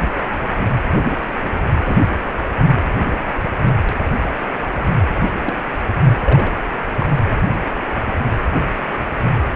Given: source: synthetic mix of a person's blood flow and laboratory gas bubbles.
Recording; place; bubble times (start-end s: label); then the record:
Doppler ultrasound of blood flow; precordium
1.84-1.99 s: bubbles
2.73-2.81 s: bubbles
4.75-4.83 s: bubbles
5.43-5.55 s: bubbles
6.25-6.53 s: bubbles
7.00-7.21 s: bubbles
From the record:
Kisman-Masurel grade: 122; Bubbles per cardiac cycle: 1 to 2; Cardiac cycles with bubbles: 10 to 50%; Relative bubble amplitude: moderate (0.250 to 0.450); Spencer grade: 2 (many but less than half of the cardiac periods contain bubble signals, singularly or in groups); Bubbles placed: anywhere in the cardiac cycle